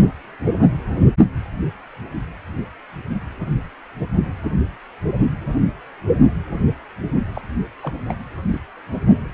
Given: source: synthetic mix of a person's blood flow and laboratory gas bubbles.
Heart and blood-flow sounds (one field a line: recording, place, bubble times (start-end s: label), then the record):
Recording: Doppler ultrasound of blood flow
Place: precordium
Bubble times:
7.33-7.42 s: bubbles
7.82-7.93 s: bubbles
7.96-8.01 s: bubbles
8.08-8.16 s: bubbles
8.52-8.59 s: bubbles
From the record:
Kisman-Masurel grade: 212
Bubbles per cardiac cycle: several, 3 to 8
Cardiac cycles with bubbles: 1 to 10%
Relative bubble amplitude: moderate (0.250 to 0.450)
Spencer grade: 1 (occasional bubble signal discernible with the cardiac motion signal, with majority of cardiac periods free of bubbles)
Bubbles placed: anywhere in the cardiac cycle